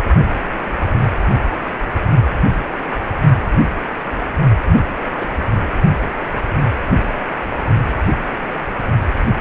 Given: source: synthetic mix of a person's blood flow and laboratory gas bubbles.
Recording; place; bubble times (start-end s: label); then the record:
Doppler ultrasound of blood flow; precordium
4.66-4.79 s: bubbles
5.13-5.28 s: bubbles
From the record:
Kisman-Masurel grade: 112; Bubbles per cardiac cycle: 1 to 2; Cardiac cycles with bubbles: 1 to 10%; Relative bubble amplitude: moderate (0.250 to 0.450); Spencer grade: 1 (occasional bubble signal discernible with the cardiac motion signal, with majority of cardiac periods free of bubbles); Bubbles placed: only in the low amplitude regions of the cardiac cycle